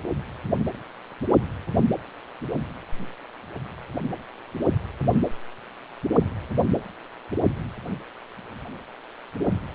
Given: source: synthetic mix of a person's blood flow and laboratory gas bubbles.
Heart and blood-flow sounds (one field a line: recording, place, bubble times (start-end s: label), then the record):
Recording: Doppler ultrasound of blood flow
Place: precordium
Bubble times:
no bubbles
From the record:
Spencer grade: 0 (complete lack of bubble signals)